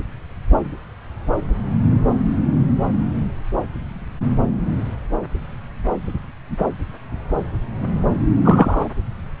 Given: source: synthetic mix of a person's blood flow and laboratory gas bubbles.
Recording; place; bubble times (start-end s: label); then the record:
Doppler ultrasound of blood flow; subclavian vein
8.44-8.88 s: bubbles
From the record:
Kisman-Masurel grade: 113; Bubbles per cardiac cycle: 1 to 2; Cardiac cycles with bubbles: 1 to 10%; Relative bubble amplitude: loud (0.450 to 0.775); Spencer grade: 1 (occasional bubble signal discernible with the cardiac motion signal, with majority of cardiac periods free of bubbles); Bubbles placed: anywhere in the cardiac cycle